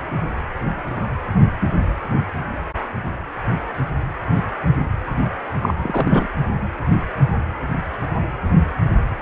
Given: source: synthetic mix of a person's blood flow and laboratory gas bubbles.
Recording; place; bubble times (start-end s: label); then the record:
Doppler ultrasound of blood flow; precordium
5.62-5.74 s: bubbles
5.82-6.28 s: bubbles
From the record:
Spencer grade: 1 (occasional bubble signal discernible with the cardiac motion signal, with majority of cardiac periods free of bubbles); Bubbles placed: anywhere in the cardiac cycle